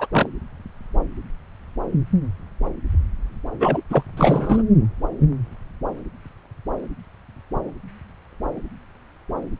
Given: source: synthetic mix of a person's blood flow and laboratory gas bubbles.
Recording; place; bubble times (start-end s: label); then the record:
Doppler ultrasound of blood flow; subclavian vein
0.00-0.07 s: bubbles
0.12-0.28 s: bubbles
3.60-3.82 s: bubbles
3.90-4.04 s: bubbles
4.17-4.62 s: bubbles
From the record:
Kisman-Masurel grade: 223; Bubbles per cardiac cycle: several, 3 to 8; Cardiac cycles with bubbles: 10 to 50%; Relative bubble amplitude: loud (0.450 to 0.775); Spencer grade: 2 (many but less than half of the cardiac periods contain bubble signals, singularly or in groups); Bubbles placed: anywhere in the cardiac cycle